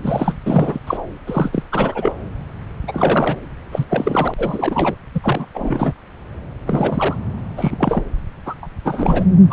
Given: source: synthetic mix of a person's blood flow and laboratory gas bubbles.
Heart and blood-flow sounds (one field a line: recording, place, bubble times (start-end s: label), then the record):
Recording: Doppler ultrasound of blood flow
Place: subclavian vein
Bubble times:
0.00-0.37 s: bubbles
0.46-0.79 s: bubbles
0.86-0.97 s: bubbles
1.25-1.63 s: bubbles
1.72-2.12 s: bubbles
2.88-3.36 s: bubbles
3.72-3.85 s: bubbles
3.89-4.34 s: bubbles
4.38-4.94 s: bubbles
5.14-5.20 s: bubbles
5.23-5.45 s: bubbles
5.54-5.93 s: bubbles
6.67-7.15 s: bubbles
7.57-8.03 s: bubbles
8.46-8.54 s: bubbles
8.62-8.67 s: bubbles
8.85-9.25 s: bubbles
9.50-9.53 s: bubbles
From the record:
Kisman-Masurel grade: 332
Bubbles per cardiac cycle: rolling drumbeat, 9 or more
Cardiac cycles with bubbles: 50 to 99%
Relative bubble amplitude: moderate (0.250 to 0.450)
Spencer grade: 3 (all of the cardiac periods contain showers or single bubble signals, but not dominating or overriding the cardiac motion signals)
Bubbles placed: anywhere in the cardiac cycle